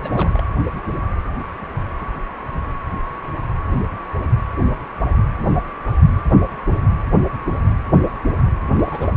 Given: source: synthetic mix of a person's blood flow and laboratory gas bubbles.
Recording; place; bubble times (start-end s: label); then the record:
Doppler ultrasound of blood flow; precordium
0.03-0.43 s: bubbles
8.75-9.09 s: bubbles
From the record:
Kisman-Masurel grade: 221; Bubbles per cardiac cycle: several, 3 to 8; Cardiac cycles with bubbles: 10 to 50%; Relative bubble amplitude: barely perceptible (0.100 to 0.250); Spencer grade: 2 (many but less than half of the cardiac periods contain bubble signals, singularly or in groups); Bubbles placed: anywhere in the cardiac cycle